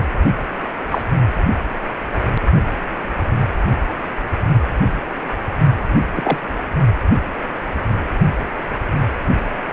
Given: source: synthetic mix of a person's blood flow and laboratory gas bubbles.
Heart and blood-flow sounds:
Doppler ultrasound of blood flow; precordium
0.90-1.02 s: bubbles
6.16-6.39 s: bubbles
From the record:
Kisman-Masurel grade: 123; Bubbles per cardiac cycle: 1 to 2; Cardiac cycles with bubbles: 10 to 50%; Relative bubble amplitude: loud (0.450 to 0.775); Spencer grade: 2 (many but less than half of the cardiac periods contain bubble signals, singularly or in groups); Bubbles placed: only in the low amplitude regions of the cardiac cycle

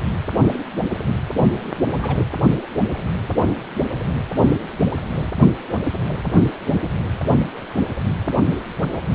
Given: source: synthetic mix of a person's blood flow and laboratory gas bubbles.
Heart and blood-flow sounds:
Doppler ultrasound of blood flow; precordium
2.02-2.17 s: bubbles
From the record:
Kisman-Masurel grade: 111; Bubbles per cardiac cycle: 1 to 2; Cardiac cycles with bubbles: 1 to 10%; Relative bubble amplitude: barely perceptible (0.100 to 0.250); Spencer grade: 1 (occasional bubble signal discernible with the cardiac motion signal, with majority of cardiac periods free of bubbles); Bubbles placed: anywhere in the cardiac cycle

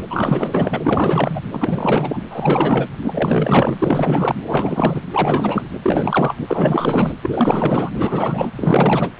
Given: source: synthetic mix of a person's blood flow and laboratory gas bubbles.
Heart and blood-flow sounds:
Doppler ultrasound of blood flow; precordium
0.10-1.42 s: bubbles
1.52-2.22 s: bubbles
2.30-2.89 s: bubbles
3.02-3.76 s: bubbles
3.78-4.36 s: bubbles
4.46-5.02 s: bubbles
5.12-5.70 s: bubbles
5.82-6.37 s: bubbles
6.48-7.17 s: bubbles
7.22-7.91 s: bubbles
7.95-8.50 s: bubbles
8.56-9.12 s: bubbles
From the record:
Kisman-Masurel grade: 444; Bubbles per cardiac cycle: continuous sound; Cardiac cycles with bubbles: 100%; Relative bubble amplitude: maximal (0.775 to 0.999); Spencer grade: 4 (maximum detectable bubble signal sounding continuously throughout systole and diastole of every cardiac period, and overriding the amplitude of the normal cardiac signals); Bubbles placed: anywhere in the cardiac cycle

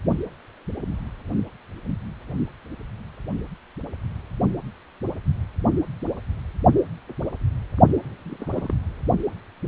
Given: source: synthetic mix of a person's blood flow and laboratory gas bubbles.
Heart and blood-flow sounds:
Doppler ultrasound of blood flow; precordium
8.25-8.74 s: bubbles
From the record:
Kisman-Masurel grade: 121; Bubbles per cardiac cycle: 1 to 2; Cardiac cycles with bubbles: 10 to 50%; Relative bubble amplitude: barely perceptible (0.100 to 0.250); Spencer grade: 2 (many but less than half of the cardiac periods contain bubble signals, singularly or in groups); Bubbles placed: only in the low amplitude regions of the cardiac cycle

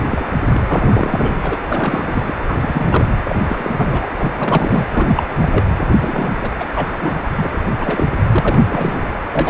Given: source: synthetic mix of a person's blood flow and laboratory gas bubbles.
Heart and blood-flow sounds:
Doppler ultrasound of blood flow; precordium
0.08-0.25 s: bubbles
0.51-1.34 s: bubbles
1.42-1.57 s: bubbles
1.69-2.35 s: bubbles
2.41-3.06 s: bubbles
3.23-3.35 s: bubbles
3.46-4.07 s: bubbles
4.19-4.87 s: bubbles
4.92-5.23 s: bubbles
5.29-5.62 s: bubbles
6.00-6.29 s: bubbles
6.41-6.50 s: bubbles
6.60-6.66 s: bubbles
6.74-6.96 s: bubbles
7.01-7.20 s: bubbles
7.36-7.49 s: bubbles
7.76-8.07 s: bubbles
8.32-8.40 s: bubbles
8.43-9.11 s: bubbles
9.29-9.50 s: bubbles
From the record:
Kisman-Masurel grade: 342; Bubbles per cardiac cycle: rolling drumbeat, 9 or more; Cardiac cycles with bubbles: 100%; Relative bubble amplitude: moderate (0.250 to 0.450); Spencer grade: 3 (all of the cardiac periods contain showers or single bubble signals, but not dominating or overriding the cardiac motion signals); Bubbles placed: anywhere in the cardiac cycle

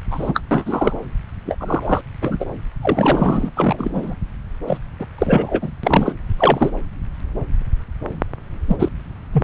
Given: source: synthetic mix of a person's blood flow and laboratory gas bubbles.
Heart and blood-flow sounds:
Doppler ultrasound of blood flow; subclavian vein
0.11-0.40 s: bubbles
0.51-0.97 s: bubbles
1.46-1.56 s: bubbles
1.59-2.02 s: bubbles
2.21-2.46 s: bubbles
2.81-3.50 s: bubbles
3.56-4.14 s: bubbles
4.67-4.78 s: bubbles
5.00-5.06 s: bubbles
5.18-5.71 s: bubbles
5.83-6.12 s: bubbles
6.38-6.71 s: bubbles
8.68-8.76 s: bubbles
8.79-8.89 s: bubbles
9.32-9.44 s: bubbles
From the record:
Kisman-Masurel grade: 233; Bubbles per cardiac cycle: several, 3 to 8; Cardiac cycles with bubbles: 50 to 99%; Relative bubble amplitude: loud (0.450 to 0.775); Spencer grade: 3 (all of the cardiac periods contain showers or single bubble signals, but not dominating or overriding the cardiac motion signals); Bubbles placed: anywhere in the cardiac cycle

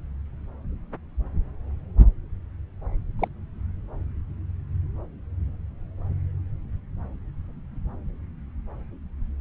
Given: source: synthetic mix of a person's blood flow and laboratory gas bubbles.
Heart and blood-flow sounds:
Doppler ultrasound of blood flow; subclavian vein
3.19-3.28 s: bubbles
From the record:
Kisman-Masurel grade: 112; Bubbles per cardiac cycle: 1 to 2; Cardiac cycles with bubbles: 1 to 10%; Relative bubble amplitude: moderate (0.250 to 0.450); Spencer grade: 1 (occasional bubble signal discernible with the cardiac motion signal, with majority of cardiac periods free of bubbles); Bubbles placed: anywhere in the cardiac cycle

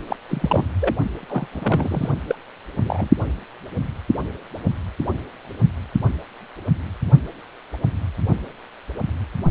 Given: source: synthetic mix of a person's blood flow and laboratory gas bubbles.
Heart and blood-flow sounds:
Doppler ultrasound of blood flow; precordium
0.07-0.17 s: bubbles
0.29-0.67 s: bubbles
0.80-0.96 s: bubbles
1.23-1.26 s: bubbles
1.28-1.49 s: bubbles
1.52-2.15 s: bubbles
2.28-2.35 s: bubbles
2.83-3.08 s: bubbles
From the record:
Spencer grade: 2 (many but less than half of the cardiac periods contain bubble signals, singularly or in groups); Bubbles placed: only in the low amplitude regions of the cardiac cycle

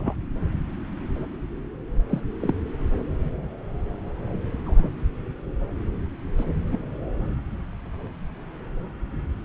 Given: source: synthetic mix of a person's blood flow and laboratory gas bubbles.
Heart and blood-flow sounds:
Doppler ultrasound of blood flow; subclavian vein
0.00-0.14 s: bubbles
2.09-2.21 s: bubbles
2.40-2.53 s: bubbles
4.66-4.88 s: bubbles
6.38-6.45 s: bubbles
6.67-6.79 s: bubbles
From the record:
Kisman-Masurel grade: 121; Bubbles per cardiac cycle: 1 to 2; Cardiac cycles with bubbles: 10 to 50%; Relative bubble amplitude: barely perceptible (0.100 to 0.250); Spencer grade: 2 (many but less than half of the cardiac periods contain bubble signals, singularly or in groups); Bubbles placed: anywhere in the cardiac cycle

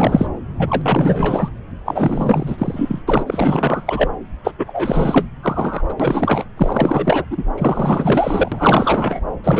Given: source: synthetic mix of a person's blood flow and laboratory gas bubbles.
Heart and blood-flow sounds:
Doppler ultrasound of blood flow; subclavian vein
0.00-0.27 s: bubbles
0.56-1.51 s: bubbles
1.85-3.02 s: bubbles
3.08-4.08 s: bubbles
4.43-4.52 s: bubbles
4.58-5.28 s: bubbles
5.42-5.86 s: bubbles
5.88-5.94 s: bubbles
6.00-6.45 s: bubbles
6.57-7.25 s: bubbles
7.31-7.45 s: bubbles
7.58-9.21 s: bubbles
9.44-9.60 s: bubbles
From the record:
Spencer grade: 4 (maximum detectable bubble signal sounding continuously throughout systole and diastole of every cardiac period, and overriding the amplitude of the normal cardiac signals); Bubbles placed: anywhere in the cardiac cycle

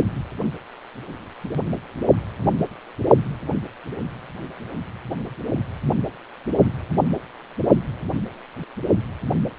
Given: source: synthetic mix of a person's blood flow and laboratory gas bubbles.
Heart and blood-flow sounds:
Doppler ultrasound of blood flow; precordium
no bubbles
From the record:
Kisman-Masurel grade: 000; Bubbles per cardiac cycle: 0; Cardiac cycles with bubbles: 0%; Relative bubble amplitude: no bubbles discernible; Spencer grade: 0 (complete lack of bubble signals)

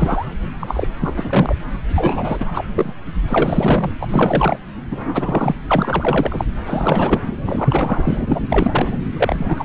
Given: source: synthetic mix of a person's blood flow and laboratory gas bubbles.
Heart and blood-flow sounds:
Doppler ultrasound of blood flow; subclavian vein
0.00-0.26 s: bubbles
0.59-0.88 s: bubbles
1.00-1.14 s: bubbles
1.17-1.55 s: bubbles
1.95-2.66 s: bubbles
2.75-2.92 s: bubbles
3.28-3.93 s: bubbles
4.00-4.58 s: bubbles
4.91-5.56 s: bubbles
5.67-6.45 s: bubbles
6.66-7.21 s: bubbles
7.46-8.39 s: bubbles
8.49-8.98 s: bubbles
9.16-9.65 s: bubbles
From the record:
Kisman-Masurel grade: 343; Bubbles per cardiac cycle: rolling drumbeat, 9 or more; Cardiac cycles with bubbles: 100%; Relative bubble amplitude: loud (0.450 to 0.775); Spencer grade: 3 (all of the cardiac periods contain showers or single bubble signals, but not dominating or overriding the cardiac motion signals); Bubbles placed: anywhere in the cardiac cycle

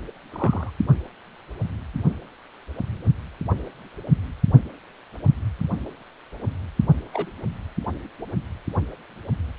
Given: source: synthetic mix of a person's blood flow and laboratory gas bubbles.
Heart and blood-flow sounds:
Doppler ultrasound of blood flow; precordium
0.32-0.70 s: bubbles
7.13-7.26 s: bubbles
From the record:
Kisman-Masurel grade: 122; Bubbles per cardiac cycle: 1 to 2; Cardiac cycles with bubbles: 10 to 50%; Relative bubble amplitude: moderate (0.250 to 0.450); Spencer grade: 2 (many but less than half of the cardiac periods contain bubble signals, singularly or in groups); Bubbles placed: only in the low amplitude regions of the cardiac cycle

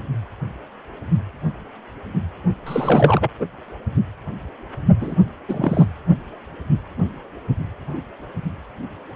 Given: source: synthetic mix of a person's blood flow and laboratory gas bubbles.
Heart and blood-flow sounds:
Doppler ultrasound of blood flow; precordium
2.66-3.30 s: bubbles
3.40-3.46 s: bubbles
5.00-5.16 s: bubbles
5.48-5.85 s: bubbles
From the record:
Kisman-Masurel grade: 223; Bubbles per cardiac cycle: several, 3 to 8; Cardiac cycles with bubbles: 10 to 50%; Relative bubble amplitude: loud (0.450 to 0.775); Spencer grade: 2 (many but less than half of the cardiac periods contain bubble signals, singularly or in groups); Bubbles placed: only in the low amplitude regions of the cardiac cycle

